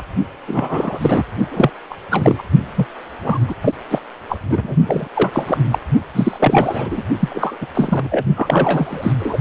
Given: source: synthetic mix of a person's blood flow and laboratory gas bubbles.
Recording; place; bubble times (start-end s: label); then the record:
Doppler ultrasound of blood flow; precordium
0.00-0.04 s: bubbles
0.47-1.23 s: bubbles
1.51-1.71 s: bubbles
1.90-1.96 s: bubbles
2.11-2.42 s: bubbles
2.75-2.87 s: bubbles
3.23-3.39 s: bubbles
3.47-3.54 s: bubbles
3.62-3.73 s: bubbles
3.91-3.98 s: bubbles
4.28-4.40 s: bubbles
4.49-4.75 s: bubbles
4.85-5.07 s: bubbles
5.14-5.58 s: bubbles
5.71-5.78 s: bubbles
6.14-7.02 s: bubbles
7.19-7.56 s: bubbles
7.61-7.66 s: bubbles
7.74-8.08 s: bubbles
8.11-8.24 s: bubbles
8.35-9.12 s: bubbles
9.19-9.38 s: bubbles
From the record:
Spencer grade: 3 (all of the cardiac periods contain showers or single bubble signals, but not dominating or overriding the cardiac motion signals); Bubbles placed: only in the low amplitude regions of the cardiac cycle